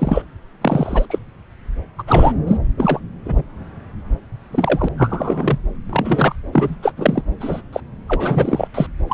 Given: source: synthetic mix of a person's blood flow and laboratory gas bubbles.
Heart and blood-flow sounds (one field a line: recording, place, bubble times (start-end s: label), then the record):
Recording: Doppler ultrasound of blood flow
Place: subclavian vein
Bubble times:
0.00-0.23 s: bubbles
0.61-1.06 s: bubbles
1.10-1.19 s: bubbles
1.98-2.03 s: bubbles
2.07-2.33 s: bubbles
2.46-2.58 s: bubbles
2.77-3.00 s: bubbles
3.25-3.43 s: bubbles
4.52-4.88 s: bubbles
4.97-5.58 s: bubbles
5.90-6.36 s: bubbles
6.53-6.76 s: bubbles
6.82-6.92 s: bubbles
6.97-7.22 s: bubbles
7.40-7.62 s: bubbles
7.72-7.80 s: bubbles
8.08-8.68 s: bubbles
8.74-8.87 s: bubbles
9.07-9.14 s: bubbles
From the record:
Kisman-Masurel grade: 243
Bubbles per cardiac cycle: several, 3 to 8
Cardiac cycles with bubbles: 100%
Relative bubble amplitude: loud (0.450 to 0.775)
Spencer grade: 3 (all of the cardiac periods contain showers or single bubble signals, but not dominating or overriding the cardiac motion signals)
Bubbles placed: anywhere in the cardiac cycle